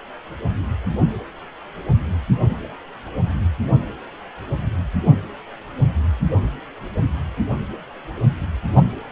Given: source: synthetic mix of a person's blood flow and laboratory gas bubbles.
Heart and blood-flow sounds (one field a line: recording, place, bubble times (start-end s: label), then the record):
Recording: Doppler ultrasound of blood flow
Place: precordium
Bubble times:
8.73-8.82 s: bubbles
From the record:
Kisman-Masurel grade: 113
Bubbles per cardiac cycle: 1 to 2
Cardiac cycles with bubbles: 1 to 10%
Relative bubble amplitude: loud (0.450 to 0.775)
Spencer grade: 1 (occasional bubble signal discernible with the cardiac motion signal, with majority of cardiac periods free of bubbles)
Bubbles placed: anywhere in the cardiac cycle